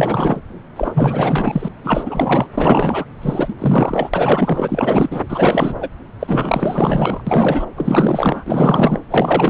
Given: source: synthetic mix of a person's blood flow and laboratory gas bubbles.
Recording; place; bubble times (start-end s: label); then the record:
Doppler ultrasound of blood flow; subclavian vein
0.00-0.40 s: bubbles
0.76-1.69 s: bubbles
1.84-2.48 s: bubbles
2.57-3.04 s: bubbles
3.22-3.54 s: bubbles
3.58-4.10 s: bubbles
4.13-5.21 s: bubbles
5.28-5.89 s: bubbles
6.19-7.22 s: bubbles
7.26-7.65 s: bubbles
7.76-8.99 s: bubbles
9.10-9.50 s: bubbles
From the record:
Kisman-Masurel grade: 444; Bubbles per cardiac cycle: continuous sound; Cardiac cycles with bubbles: 100%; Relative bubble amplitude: maximal (0.775 to 0.999); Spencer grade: 4 (maximum detectable bubble signal sounding continuously throughout systole and diastole of every cardiac period, and overriding the amplitude of the normal cardiac signals); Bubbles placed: anywhere in the cardiac cycle